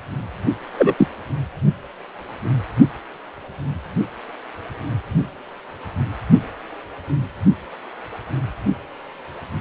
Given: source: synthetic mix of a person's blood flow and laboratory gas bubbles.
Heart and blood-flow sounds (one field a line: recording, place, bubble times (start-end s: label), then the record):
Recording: Doppler ultrasound of blood flow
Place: precordium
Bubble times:
0.77-0.94 s: bubbles
0.98-1.07 s: bubbles
From the record:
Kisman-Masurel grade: 113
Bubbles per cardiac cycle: 1 to 2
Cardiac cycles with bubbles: 1 to 10%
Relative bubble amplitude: loud (0.450 to 0.775)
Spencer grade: 1 (occasional bubble signal discernible with the cardiac motion signal, with majority of cardiac periods free of bubbles)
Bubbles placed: only in the low amplitude regions of the cardiac cycle